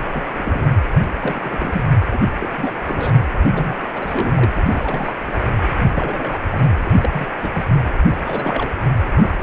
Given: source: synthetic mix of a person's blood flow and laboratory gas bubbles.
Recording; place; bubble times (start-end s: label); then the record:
Doppler ultrasound of blood flow; precordium
0.12-0.25 s: bubbles
0.37-0.66 s: bubbles
1.20-1.84 s: bubbles
2.12-2.17 s: bubbles
2.40-2.49 s: bubbles
2.57-2.78 s: bubbles
2.86-3.24 s: bubbles
3.51-3.74 s: bubbles
3.94-4.52 s: bubbles
4.55-4.62 s: bubbles
4.65-5.12 s: bubbles
5.26-5.33 s: bubbles
5.56-5.63 s: bubbles
5.93-6.38 s: bubbles
6.50-6.69 s: bubbles
6.84-7.29 s: bubbles
7.42-7.65 s: bubbles
8.25-8.71 s: bubbles
9.12-9.38 s: bubbles
From the record:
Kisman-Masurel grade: 242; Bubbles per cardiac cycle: several, 3 to 8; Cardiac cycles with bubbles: 100%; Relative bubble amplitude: moderate (0.250 to 0.450); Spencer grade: 3 (all of the cardiac periods contain showers or single bubble signals, but not dominating or overriding the cardiac motion signals); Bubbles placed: anywhere in the cardiac cycle